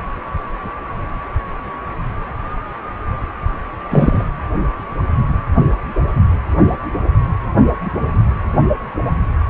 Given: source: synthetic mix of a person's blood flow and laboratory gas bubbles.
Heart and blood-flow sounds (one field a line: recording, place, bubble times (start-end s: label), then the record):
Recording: Doppler ultrasound of blood flow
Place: precordium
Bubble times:
3.90-4.24 s: bubbles
From the record:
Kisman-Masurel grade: 113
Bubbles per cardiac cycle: 1 to 2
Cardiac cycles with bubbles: 1 to 10%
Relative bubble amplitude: loud (0.450 to 0.775)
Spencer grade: 1 (occasional bubble signal discernible with the cardiac motion signal, with majority of cardiac periods free of bubbles)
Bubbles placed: only in the low amplitude regions of the cardiac cycle